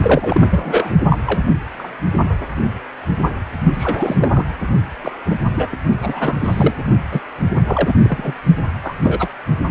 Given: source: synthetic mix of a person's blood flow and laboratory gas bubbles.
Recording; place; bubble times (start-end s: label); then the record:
Doppler ultrasound of blood flow; precordium
0.03-0.42 s: bubbles
0.51-0.90 s: bubbles
1.10-1.19 s: bubbles
1.25-1.54 s: bubbles
1.77-1.88 s: bubbles
3.73-4.17 s: bubbles
4.20-4.45 s: bubbles
5.03-5.12 s: bubbles
5.26-5.36 s: bubbles
5.57-5.68 s: bubbles
5.72-5.77 s: bubbles
6.02-6.35 s: bubbles
6.41-6.74 s: bubbles
7.12-7.21 s: bubbles
7.67-7.94 s: bubbles
8.03-8.33 s: bubbles
8.83-8.95 s: bubbles
9.02-9.28 s: bubbles
From the record:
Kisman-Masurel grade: 232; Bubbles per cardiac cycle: several, 3 to 8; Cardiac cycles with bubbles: 50 to 99%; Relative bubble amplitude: moderate (0.250 to 0.450); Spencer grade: 3 (all of the cardiac periods contain showers or single bubble signals, but not dominating or overriding the cardiac motion signals); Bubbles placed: only in the low amplitude regions of the cardiac cycle